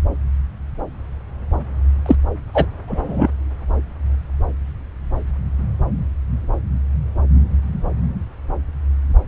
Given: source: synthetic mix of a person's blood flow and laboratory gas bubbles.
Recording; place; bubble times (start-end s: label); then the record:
Doppler ultrasound of blood flow; subclavian vein
2.06-2.15 s: bubbles
2.53-2.66 s: bubbles
2.87-3.29 s: bubbles
From the record:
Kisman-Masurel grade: 213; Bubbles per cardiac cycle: several, 3 to 8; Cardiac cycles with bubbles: 1 to 10%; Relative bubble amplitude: loud (0.450 to 0.775); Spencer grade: 1 (occasional bubble signal discernible with the cardiac motion signal, with majority of cardiac periods free of bubbles); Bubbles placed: anywhere in the cardiac cycle